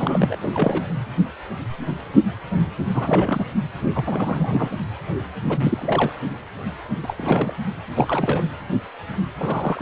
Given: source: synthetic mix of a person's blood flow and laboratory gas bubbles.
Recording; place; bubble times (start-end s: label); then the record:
Doppler ultrasound of blood flow; precordium
0.00-0.35 s: bubbles
0.42-0.84 s: bubbles
2.94-3.46 s: bubbles
3.95-4.86 s: bubbles
5.45-6.12 s: bubbles
7.03-7.15 s: bubbles
7.18-7.54 s: bubbles
7.95-8.44 s: bubbles
9.38-9.82 s: bubbles
From the record:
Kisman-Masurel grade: 332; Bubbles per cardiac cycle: rolling drumbeat, 9 or more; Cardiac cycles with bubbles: 50 to 99%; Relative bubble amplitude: moderate (0.250 to 0.450); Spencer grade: 3 (all of the cardiac periods contain showers or single bubble signals, but not dominating or overriding the cardiac motion signals); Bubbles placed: anywhere in the cardiac cycle